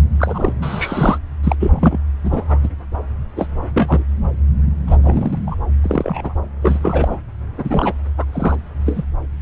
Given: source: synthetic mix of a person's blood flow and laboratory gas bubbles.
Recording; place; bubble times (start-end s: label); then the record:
Doppler ultrasound of blood flow; subclavian vein
0.18-0.53 s: bubbles
0.61-1.18 s: bubbles
1.43-1.56 s: bubbles
1.59-1.99 s: bubbles
2.23-2.60 s: bubbles
2.62-2.69 s: bubbles
3.35-3.47 s: bubbles
3.76-4.04 s: bubbles
4.87-4.96 s: bubbles
5.03-5.42 s: bubbles
5.46-5.55 s: bubbles
5.82-6.34 s: bubbles
6.62-6.79 s: bubbles
6.82-7.20 s: bubbles
7.58-7.93 s: bubbles
8.18-8.24 s: bubbles
8.32-8.56 s: bubbles
8.86-9.04 s: bubbles
From the record:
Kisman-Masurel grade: 242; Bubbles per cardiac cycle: several, 3 to 8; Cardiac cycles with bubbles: 100%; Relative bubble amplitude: moderate (0.250 to 0.450); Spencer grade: 3 (all of the cardiac periods contain showers or single bubble signals, but not dominating or overriding the cardiac motion signals); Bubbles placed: anywhere in the cardiac cycle